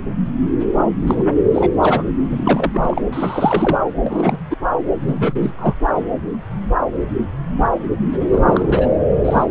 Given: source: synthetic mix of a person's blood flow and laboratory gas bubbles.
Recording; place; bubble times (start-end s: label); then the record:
Doppler ultrasound of blood flow; subclavian vein
0.59-0.66 s: bubbles
1.07-1.23 s: bubbles
1.54-1.71 s: bubbles
1.82-2.03 s: bubbles
2.29-3.02 s: bubbles
3.12-3.82 s: bubbles
4.02-4.38 s: bubbles
4.50-4.55 s: bubbles
5.00-5.51 s: bubbles
5.58-5.74 s: bubbles
8.29-8.89 s: bubbles
9.25-9.45 s: bubbles
From the record:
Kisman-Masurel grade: 233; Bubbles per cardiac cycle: several, 3 to 8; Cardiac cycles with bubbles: 50 to 99%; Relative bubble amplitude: loud (0.450 to 0.775); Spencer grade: 3 (all of the cardiac periods contain showers or single bubble signals, but not dominating or overriding the cardiac motion signals); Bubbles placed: anywhere in the cardiac cycle